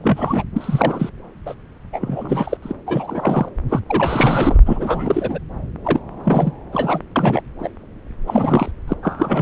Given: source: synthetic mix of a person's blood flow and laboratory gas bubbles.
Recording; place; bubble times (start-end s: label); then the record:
Doppler ultrasound of blood flow; subclavian vein
0.02-0.43 s: bubbles
0.55-1.10 s: bubbles
1.46-1.54 s: bubbles
1.93-2.57 s: bubbles
2.62-2.73 s: bubbles
2.87-3.48 s: bubbles
3.69-3.81 s: bubbles
3.89-4.59 s: bubbles
4.65-5.38 s: bubbles
5.84-5.99 s: bubbles
6.23-6.52 s: bubbles
6.72-6.99 s: bubbles
7.15-7.42 s: bubbles
7.59-7.69 s: bubbles
8.26-8.71 s: bubbles
8.88-8.94 s: bubbles
9.03-9.42 s: bubbles
From the record:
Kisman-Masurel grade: 343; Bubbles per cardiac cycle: rolling drumbeat, 9 or more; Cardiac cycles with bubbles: 100%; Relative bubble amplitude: loud (0.450 to 0.775); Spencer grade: 3 (all of the cardiac periods contain showers or single bubble signals, but not dominating or overriding the cardiac motion signals); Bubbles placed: anywhere in the cardiac cycle